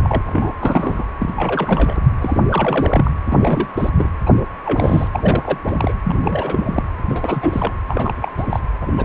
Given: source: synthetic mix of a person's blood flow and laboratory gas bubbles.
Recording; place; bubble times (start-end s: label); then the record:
Doppler ultrasound of blood flow; precordium
0.00-0.22 s: bubbles
0.26-0.52 s: bubbles
0.60-1.04 s: bubbles
1.19-1.33 s: bubbles
1.36-1.99 s: bubbles
2.21-2.42 s: bubbles
2.49-3.11 s: bubbles
3.25-3.37 s: bubbles
3.40-3.68 s: bubbles
3.77-3.89 s: bubbles
3.98-4.09 s: bubbles
4.26-4.31 s: bubbles
4.65-5.08 s: bubbles
5.11-5.58 s: bubbles
5.64-5.93 s: bubbles
6.04-6.83 s: bubbles
7.09-7.73 s: bubbles
7.88-8.14 s: bubbles
8.21-8.31 s: bubbles
8.37-8.61 s: bubbles
8.81-8.87 s: bubbles
8.97-9.05 s: bubbles
From the record:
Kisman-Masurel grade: 342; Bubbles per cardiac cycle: rolling drumbeat, 9 or more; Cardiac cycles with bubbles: 100%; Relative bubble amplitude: moderate (0.250 to 0.450); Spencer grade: 3 (all of the cardiac periods contain showers or single bubble signals, but not dominating or overriding the cardiac motion signals); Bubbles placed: anywhere in the cardiac cycle